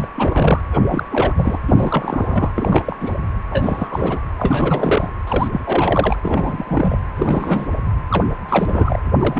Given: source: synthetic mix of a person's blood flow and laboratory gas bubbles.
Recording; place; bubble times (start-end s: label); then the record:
Doppler ultrasound of blood flow; precordium
0.00-0.07 s: bubbles
0.16-0.60 s: bubbles
0.71-0.80 s: bubbles
0.88-1.05 s: bubbles
1.11-1.33 s: bubbles
1.37-1.59 s: bubbles
1.67-2.51 s: bubbles
2.56-2.96 s: bubbles
3.00-3.15 s: bubbles
3.50-4.21 s: bubbles
4.38-5.10 s: bubbles
5.27-5.48 s: bubbles
5.52-5.61 s: bubbles
5.65-6.16 s: bubbles
6.22-6.98 s: bubbles
7.16-7.76 s: bubbles
8.09-8.25 s: bubbles
8.49-9.00 s: bubbles
9.19-9.39 s: bubbles
From the record:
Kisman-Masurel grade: 342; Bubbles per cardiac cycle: rolling drumbeat, 9 or more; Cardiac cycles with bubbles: 100%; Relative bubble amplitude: moderate (0.250 to 0.450); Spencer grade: 3 (all of the cardiac periods contain showers or single bubble signals, but not dominating or overriding the cardiac motion signals); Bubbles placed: anywhere in the cardiac cycle